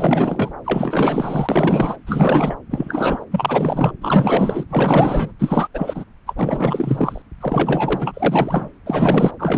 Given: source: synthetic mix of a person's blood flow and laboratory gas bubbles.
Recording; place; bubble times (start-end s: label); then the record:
Doppler ultrasound of blood flow; subclavian vein
0.00-0.52 s: bubbles
0.64-1.98 s: bubbles
2.06-2.55 s: bubbles
2.71-3.25 s: bubbles
3.31-3.92 s: bubbles
4.01-4.65 s: bubbles
4.70-5.33 s: bubbles
5.39-5.67 s: bubbles
5.74-6.04 s: bubbles
6.26-7.22 s: bubbles
7.41-8.69 s: bubbles
8.86-9.32 s: bubbles
9.38-9.58 s: bubbles
From the record:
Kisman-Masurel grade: 444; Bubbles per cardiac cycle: continuous sound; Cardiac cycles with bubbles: 100%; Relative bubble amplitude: maximal (0.775 to 0.999); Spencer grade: 4 (maximum detectable bubble signal sounding continuously throughout systole and diastole of every cardiac period, and overriding the amplitude of the normal cardiac signals); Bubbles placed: anywhere in the cardiac cycle